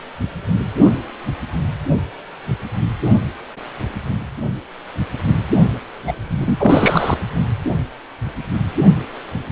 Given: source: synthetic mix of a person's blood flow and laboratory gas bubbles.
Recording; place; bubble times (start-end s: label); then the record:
Doppler ultrasound of blood flow; precordium
6.07-6.13 s: bubbles
6.29-7.17 s: bubbles
From the record:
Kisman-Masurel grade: 223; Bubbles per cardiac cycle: several, 3 to 8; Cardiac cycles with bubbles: 10 to 50%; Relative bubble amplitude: loud (0.450 to 0.775); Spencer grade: 2 (many but less than half of the cardiac periods contain bubble signals, singularly or in groups); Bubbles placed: only in the low amplitude regions of the cardiac cycle